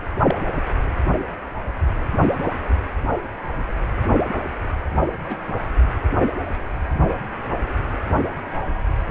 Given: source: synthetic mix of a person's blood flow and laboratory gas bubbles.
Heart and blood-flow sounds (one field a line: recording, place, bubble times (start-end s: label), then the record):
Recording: Doppler ultrasound of blood flow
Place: precordium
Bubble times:
0.27-0.34 s: bubbles
5.07-5.14 s: bubbles
5.29-5.46 s: bubbles
From the record:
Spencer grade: 2 (many but less than half of the cardiac periods contain bubble signals, singularly or in groups)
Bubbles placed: anywhere in the cardiac cycle